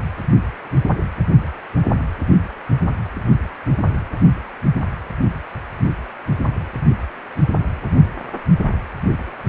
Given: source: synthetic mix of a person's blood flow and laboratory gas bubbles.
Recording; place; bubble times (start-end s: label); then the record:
Doppler ultrasound of blood flow; precordium
9.46-9.49 s: bubbles
From the record:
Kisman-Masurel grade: 112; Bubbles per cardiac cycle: 1 to 2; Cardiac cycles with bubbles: 1 to 10%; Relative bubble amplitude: moderate (0.250 to 0.450); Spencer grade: 1 (occasional bubble signal discernible with the cardiac motion signal, with majority of cardiac periods free of bubbles); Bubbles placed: only in the low amplitude regions of the cardiac cycle